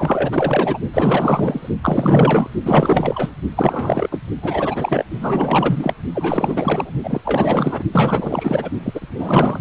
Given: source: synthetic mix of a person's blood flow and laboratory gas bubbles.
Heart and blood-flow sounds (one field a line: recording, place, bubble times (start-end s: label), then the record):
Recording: Doppler ultrasound of blood flow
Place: precordium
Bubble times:
0.00-0.79 s: bubbles
0.93-1.69 s: bubbles
1.82-2.47 s: bubbles
2.65-3.33 s: bubbles
3.56-4.08 s: bubbles
4.11-4.19 s: bubbles
4.42-5.05 s: bubbles
5.19-5.93 s: bubbles
6.13-6.93 s: bubbles
7.03-7.21 s: bubbles
7.25-7.83 s: bubbles
7.92-8.69 s: bubbles
8.83-9.59 s: bubbles
From the record:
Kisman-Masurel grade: 444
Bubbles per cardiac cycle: continuous sound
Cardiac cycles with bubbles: 100%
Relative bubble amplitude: maximal (0.775 to 0.999)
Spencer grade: 4 (maximum detectable bubble signal sounding continuously throughout systole and diastole of every cardiac period, and overriding the amplitude of the normal cardiac signals)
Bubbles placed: only in the low amplitude regions of the cardiac cycle